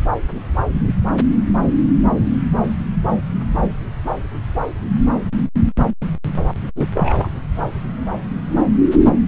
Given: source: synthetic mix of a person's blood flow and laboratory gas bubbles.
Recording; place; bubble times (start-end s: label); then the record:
Doppler ultrasound of blood flow; subclavian vein
6.75-6.87 s: bubbles
6.94-7.29 s: bubbles
From the record:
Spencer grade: 1 (occasional bubble signal discernible with the cardiac motion signal, with majority of cardiac periods free of bubbles); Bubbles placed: anywhere in the cardiac cycle